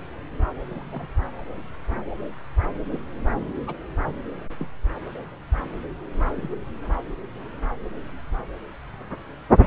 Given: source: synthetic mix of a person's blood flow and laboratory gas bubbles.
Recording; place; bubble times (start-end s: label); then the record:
Doppler ultrasound of blood flow; subclavian vein
0.67-0.89 s: bubbles
0.92-1.07 s: bubbles
2.90-2.99 s: bubbles
3.67-3.74 s: bubbles
4.57-4.66 s: bubbles
6.38-6.60 s: bubbles
9.63-9.67 s: bubbles
From the record:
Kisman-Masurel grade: 121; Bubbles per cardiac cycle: 1 to 2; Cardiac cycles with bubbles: 10 to 50%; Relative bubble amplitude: barely perceptible (0.100 to 0.250); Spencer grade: 2 (many but less than half of the cardiac periods contain bubble signals, singularly or in groups); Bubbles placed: anywhere in the cardiac cycle